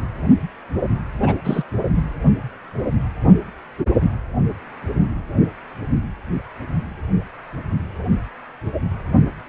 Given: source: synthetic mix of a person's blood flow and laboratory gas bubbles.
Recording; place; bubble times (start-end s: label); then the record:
Doppler ultrasound of blood flow; precordium
1.20-1.35 s: bubbles
1.44-1.63 s: bubbles
1.95-2.03 s: bubbles
From the record:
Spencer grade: 1 (occasional bubble signal discernible with the cardiac motion signal, with majority of cardiac periods free of bubbles); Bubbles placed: anywhere in the cardiac cycle